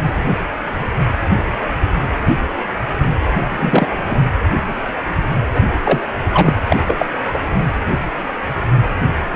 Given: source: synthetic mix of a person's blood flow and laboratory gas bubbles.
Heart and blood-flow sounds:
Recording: Doppler ultrasound of blood flow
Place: precordium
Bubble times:
3.50-3.88 s: bubbles
3.90-3.95 s: bubbles
4.07-4.20 s: bubbles
5.54-5.61 s: bubbles
5.83-6.00 s: bubbles
6.33-6.53 s: bubbles
6.69-6.76 s: bubbles
6.86-7.06 s: bubbles
7.33-7.38 s: bubbles
From the record:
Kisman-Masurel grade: 223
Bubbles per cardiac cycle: several, 3 to 8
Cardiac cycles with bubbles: 10 to 50%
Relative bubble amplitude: loud (0.450 to 0.775)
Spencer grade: 2 (many but less than half of the cardiac periods contain bubble signals, singularly or in groups)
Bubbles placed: anywhere in the cardiac cycle

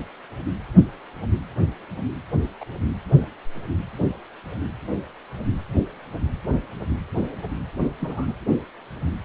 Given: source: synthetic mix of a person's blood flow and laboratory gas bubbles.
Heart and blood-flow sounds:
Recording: Doppler ultrasound of blood flow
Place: precordium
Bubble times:
2.60-2.65 s: bubbles
8.00-8.33 s: bubbles
From the record:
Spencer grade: 2 (many but less than half of the cardiac periods contain bubble signals, singularly or in groups)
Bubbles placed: anywhere in the cardiac cycle

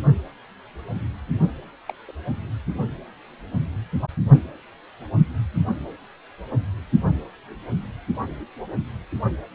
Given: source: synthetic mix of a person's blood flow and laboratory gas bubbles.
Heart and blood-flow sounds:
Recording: Doppler ultrasound of blood flow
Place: precordium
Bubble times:
1.89-1.95 s: bubbles
2.07-2.11 s: bubbles
From the record:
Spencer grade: 1 (occasional bubble signal discernible with the cardiac motion signal, with majority of cardiac periods free of bubbles)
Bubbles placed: only in the low amplitude regions of the cardiac cycle

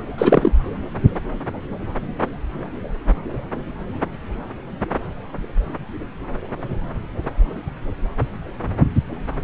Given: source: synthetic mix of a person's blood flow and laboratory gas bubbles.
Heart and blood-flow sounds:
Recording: Doppler ultrasound of blood flow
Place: subclavian vein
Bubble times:
0.18-0.51 s: bubbles
From the record:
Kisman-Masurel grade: 223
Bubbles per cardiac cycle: several, 3 to 8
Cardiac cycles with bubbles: 10 to 50%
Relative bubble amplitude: loud (0.450 to 0.775)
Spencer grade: 2 (many but less than half of the cardiac periods contain bubble signals, singularly or in groups)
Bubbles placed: anywhere in the cardiac cycle

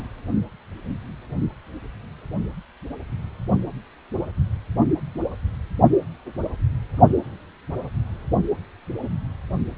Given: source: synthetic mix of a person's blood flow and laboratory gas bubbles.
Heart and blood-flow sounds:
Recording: Doppler ultrasound of blood flow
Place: precordium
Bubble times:
0.00-0.02 s: bubbles
From the record:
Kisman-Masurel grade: 113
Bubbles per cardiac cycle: 1 to 2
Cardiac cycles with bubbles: 1 to 10%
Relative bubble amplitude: loud (0.450 to 0.775)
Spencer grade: 1 (occasional bubble signal discernible with the cardiac motion signal, with majority of cardiac periods free of bubbles)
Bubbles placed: only in the low amplitude regions of the cardiac cycle

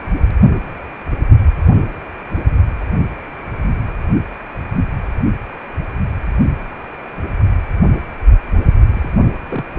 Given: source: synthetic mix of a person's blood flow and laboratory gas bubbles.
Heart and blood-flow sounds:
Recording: Doppler ultrasound of blood flow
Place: precordium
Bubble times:
8.93-9.10 s: bubbles
9.49-9.65 s: bubbles
9.77-9.79 s: bubbles
From the record:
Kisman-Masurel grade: 211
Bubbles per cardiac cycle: several, 3 to 8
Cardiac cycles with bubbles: 1 to 10%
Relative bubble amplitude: barely perceptible (0.100 to 0.250)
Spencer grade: 1 (occasional bubble signal discernible with the cardiac motion signal, with majority of cardiac periods free of bubbles)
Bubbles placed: only in the low amplitude regions of the cardiac cycle

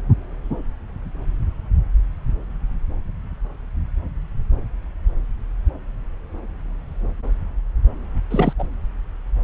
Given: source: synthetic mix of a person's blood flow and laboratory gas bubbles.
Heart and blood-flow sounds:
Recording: Doppler ultrasound of blood flow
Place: subclavian vein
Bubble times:
8.30-8.53 s: bubbles
8.58-8.67 s: bubbles
From the record:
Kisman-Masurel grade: 212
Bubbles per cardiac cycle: several, 3 to 8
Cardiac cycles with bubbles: 1 to 10%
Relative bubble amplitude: moderate (0.250 to 0.450)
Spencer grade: 1 (occasional bubble signal discernible with the cardiac motion signal, with majority of cardiac periods free of bubbles)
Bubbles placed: anywhere in the cardiac cycle

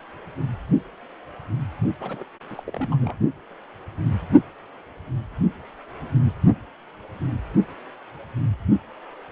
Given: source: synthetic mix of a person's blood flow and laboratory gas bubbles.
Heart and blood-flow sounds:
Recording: Doppler ultrasound of blood flow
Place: precordium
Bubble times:
2.00-2.24 s: bubbles
2.50-2.63 s: bubbles
2.67-2.71 s: bubbles
2.73-2.88 s: bubbles
2.91-2.96 s: bubbles
3.00-3.17 s: bubbles
From the record:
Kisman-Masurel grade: 211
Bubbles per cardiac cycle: several, 3 to 8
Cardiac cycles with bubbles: 1 to 10%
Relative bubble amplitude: barely perceptible (0.100 to 0.250)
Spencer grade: 1 (occasional bubble signal discernible with the cardiac motion signal, with majority of cardiac periods free of bubbles)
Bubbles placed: only in the low amplitude regions of the cardiac cycle

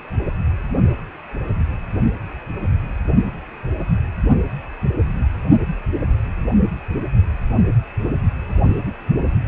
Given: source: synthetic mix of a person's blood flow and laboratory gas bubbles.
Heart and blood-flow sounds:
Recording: Doppler ultrasound of blood flow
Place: precordium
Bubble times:
no bubbles
From the record:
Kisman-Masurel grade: 000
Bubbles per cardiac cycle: 0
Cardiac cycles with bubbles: 0%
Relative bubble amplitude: no bubbles discernible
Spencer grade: 0 (complete lack of bubble signals)

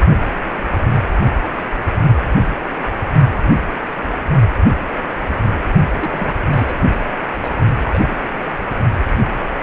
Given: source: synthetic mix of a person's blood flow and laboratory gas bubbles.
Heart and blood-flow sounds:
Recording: Doppler ultrasound of blood flow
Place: precordium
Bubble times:
5.98-6.34 s: bubbles
6.51-6.76 s: bubbles
7.42-7.50 s: bubbles
7.85-8.24 s: bubbles
8.69-8.75 s: bubbles
From the record:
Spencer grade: 2 (many but less than half of the cardiac periods contain bubble signals, singularly or in groups)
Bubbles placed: only in the low amplitude regions of the cardiac cycle

